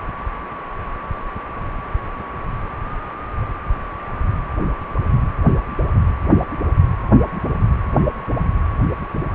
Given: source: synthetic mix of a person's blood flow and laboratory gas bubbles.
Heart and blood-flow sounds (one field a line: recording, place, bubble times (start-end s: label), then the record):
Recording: Doppler ultrasound of blood flow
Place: precordium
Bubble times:
no bubbles
From the record:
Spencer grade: 0 (complete lack of bubble signals)